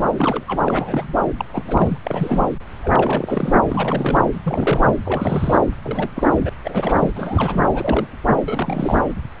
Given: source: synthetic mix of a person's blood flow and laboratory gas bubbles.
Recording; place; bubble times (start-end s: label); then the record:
Doppler ultrasound of blood flow; subclavian vein
0.17-0.44 s: bubbles
0.47-0.61 s: bubbles
0.66-1.15 s: bubbles
1.39-1.45 s: bubbles
1.53-1.62 s: bubbles
1.66-1.97 s: bubbles
2.04-2.49 s: bubbles
2.83-3.62 s: bubbles
3.69-4.20 s: bubbles
4.33-4.40 s: bubbles
4.43-4.93 s: bubbles
5.05-5.62 s: bubbles
5.83-6.12 s: bubbles
6.15-6.35 s: bubbles
6.38-6.50 s: bubbles
6.64-7.12 s: bubbles
7.15-7.70 s: bubbles
7.74-8.07 s: bubbles
8.45-9.02 s: bubbles
From the record:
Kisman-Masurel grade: 342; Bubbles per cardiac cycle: rolling drumbeat, 9 or more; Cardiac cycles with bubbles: 100%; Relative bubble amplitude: moderate (0.250 to 0.450); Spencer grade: 3 (all of the cardiac periods contain showers or single bubble signals, but not dominating or overriding the cardiac motion signals); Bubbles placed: anywhere in the cardiac cycle